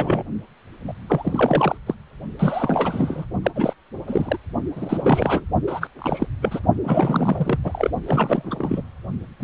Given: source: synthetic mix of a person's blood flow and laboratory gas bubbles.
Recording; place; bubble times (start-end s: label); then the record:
Doppler ultrasound of blood flow; precordium
0.00-0.23 s: bubbles
0.88-0.93 s: bubbles
1.07-1.78 s: bubbles
1.86-1.95 s: bubbles
2.39-3.25 s: bubbles
3.43-3.51 s: bubbles
3.55-3.73 s: bubbles
4.08-4.38 s: bubbles
4.75-5.44 s: bubbles
5.67-5.88 s: bubbles
5.98-6.26 s: bubbles
6.42-6.60 s: bubbles
6.83-7.59 s: bubbles
7.64-7.91 s: bubbles
8.06-8.82 s: bubbles
9.39-9.44 s: bubbles
From the record:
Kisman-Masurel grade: 342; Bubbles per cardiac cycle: rolling drumbeat, 9 or more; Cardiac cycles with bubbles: 100%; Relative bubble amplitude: moderate (0.250 to 0.450); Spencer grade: 3 (all of the cardiac periods contain showers or single bubble signals, but not dominating or overriding the cardiac motion signals); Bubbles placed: only in the low amplitude regions of the cardiac cycle